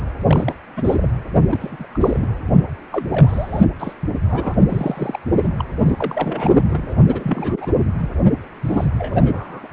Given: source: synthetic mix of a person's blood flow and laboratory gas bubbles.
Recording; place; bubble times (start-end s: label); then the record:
Doppler ultrasound of blood flow; precordium
0.26-0.55 s: bubbles
0.77-1.09 s: bubbles
1.50-1.76 s: bubbles
1.79-1.86 s: bubbles
1.94-1.98 s: bubbles
2.00-2.28 s: bubbles
2.92-3.06 s: bubbles
3.11-3.62 s: bubbles
3.79-3.93 s: bubbles
4.29-4.54 s: bubbles
4.68-5.18 s: bubbles
5.37-5.64 s: bubbles
5.79-6.94 s: bubbles
7.07-7.73 s: bubbles
7.97-8.09 s: bubbles
8.64-8.88 s: bubbles
8.98-9.68 s: bubbles
From the record:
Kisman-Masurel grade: 342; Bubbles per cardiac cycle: rolling drumbeat, 9 or more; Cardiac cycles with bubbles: 100%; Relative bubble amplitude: moderate (0.250 to 0.450); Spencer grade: 3 (all of the cardiac periods contain showers or single bubble signals, but not dominating or overriding the cardiac motion signals); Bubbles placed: anywhere in the cardiac cycle